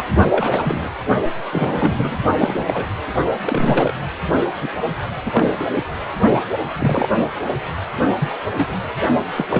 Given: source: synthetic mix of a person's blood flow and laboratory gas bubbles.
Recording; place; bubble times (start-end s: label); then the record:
Doppler ultrasound of blood flow; precordium
0.00-0.04 s: bubbles
0.31-0.90 s: bubbles
1.52-2.17 s: bubbles
2.37-2.85 s: bubbles
3.46-3.94 s: bubbles
4.61-4.70 s: bubbles
5.25-5.66 s: bubbles
6.79-7.15 s: bubbles
8.20-8.35 s: bubbles
8.54-8.76 s: bubbles
9.36-9.46 s: bubbles
9.50-9.60 s: bubbles
From the record:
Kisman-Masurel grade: 242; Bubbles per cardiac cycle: several, 3 to 8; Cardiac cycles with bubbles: 100%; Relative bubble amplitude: moderate (0.250 to 0.450); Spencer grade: 3 (all of the cardiac periods contain showers or single bubble signals, but not dominating or overriding the cardiac motion signals); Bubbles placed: only in the low amplitude regions of the cardiac cycle